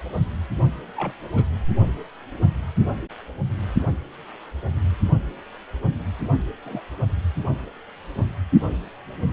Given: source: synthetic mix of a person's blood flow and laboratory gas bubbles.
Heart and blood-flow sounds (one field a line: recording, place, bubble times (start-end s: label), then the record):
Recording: Doppler ultrasound of blood flow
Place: precordium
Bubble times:
0.97-1.13 s: bubbles
1.33-1.45 s: bubbles
6.65-6.81 s: bubbles
From the record:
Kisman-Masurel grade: 121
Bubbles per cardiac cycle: 1 to 2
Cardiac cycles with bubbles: 10 to 50%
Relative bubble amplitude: barely perceptible (0.100 to 0.250)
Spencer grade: 2 (many but less than half of the cardiac periods contain bubble signals, singularly or in groups)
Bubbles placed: only in the low amplitude regions of the cardiac cycle